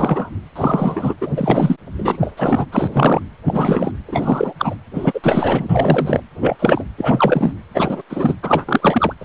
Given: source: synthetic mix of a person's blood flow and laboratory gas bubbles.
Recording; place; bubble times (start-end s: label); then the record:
Doppler ultrasound of blood flow; precordium
0.00-0.29 s: bubbles
0.55-1.14 s: bubbles
1.21-1.76 s: bubbles
1.98-2.17 s: bubbles
2.21-2.32 s: bubbles
2.36-2.66 s: bubbles
2.72-3.19 s: bubbles
3.45-3.91 s: bubbles
4.08-4.54 s: bubbles
4.58-4.76 s: bubbles
4.94-5.21 s: bubbles
5.23-6.21 s: bubbles
6.41-6.57 s: bubbles
6.59-6.84 s: bubbles
6.98-7.53 s: bubbles
7.74-8.01 s: bubbles
8.09-8.34 s: bubbles
8.42-9.14 s: bubbles
9.21-9.25 s: bubbles
From the record:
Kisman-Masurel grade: 333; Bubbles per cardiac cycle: rolling drumbeat, 9 or more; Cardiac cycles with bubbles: 50 to 99%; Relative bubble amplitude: loud (0.450 to 0.775); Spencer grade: 3 (all of the cardiac periods contain showers or single bubble signals, but not dominating or overriding the cardiac motion signals); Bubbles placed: anywhere in the cardiac cycle